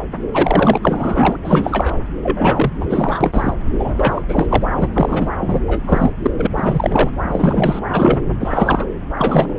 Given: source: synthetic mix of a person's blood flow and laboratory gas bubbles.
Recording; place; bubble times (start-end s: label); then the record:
Doppler ultrasound of blood flow; subclavian vein
0.33-0.78 s: bubbles
0.82-1.36 s: bubbles
1.43-1.97 s: bubbles
2.23-2.71 s: bubbles
2.79-3.54 s: bubbles
3.77-4.24 s: bubbles
4.28-4.46 s: bubbles
4.49-4.63 s: bubbles
4.76-5.30 s: bubbles
5.39-5.60 s: bubbles
5.67-5.79 s: bubbles
5.86-6.12 s: bubbles
6.22-6.30 s: bubbles
6.36-6.47 s: bubbles
6.56-7.10 s: bubbles
7.23-7.79 s: bubbles
7.92-8.23 s: bubbles
8.40-8.88 s: bubbles
9.17-9.55 s: bubbles
From the record:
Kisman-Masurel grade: 343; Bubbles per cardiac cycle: rolling drumbeat, 9 or more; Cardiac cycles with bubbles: 100%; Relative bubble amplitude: loud (0.450 to 0.775); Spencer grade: 3 (all of the cardiac periods contain showers or single bubble signals, but not dominating or overriding the cardiac motion signals); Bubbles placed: anywhere in the cardiac cycle